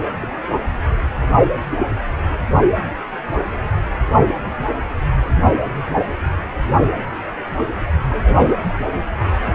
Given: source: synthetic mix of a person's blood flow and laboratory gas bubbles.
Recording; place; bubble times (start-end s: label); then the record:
Doppler ultrasound of blood flow; precordium
0.21-0.29 s: bubbles
5.44-5.55 s: bubbles
8.09-8.56 s: bubbles
From the record:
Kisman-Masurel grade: 121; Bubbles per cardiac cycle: 1 to 2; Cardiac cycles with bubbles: 10 to 50%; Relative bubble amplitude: barely perceptible (0.100 to 0.250); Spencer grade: 2 (many but less than half of the cardiac periods contain bubble signals, singularly or in groups); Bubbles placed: anywhere in the cardiac cycle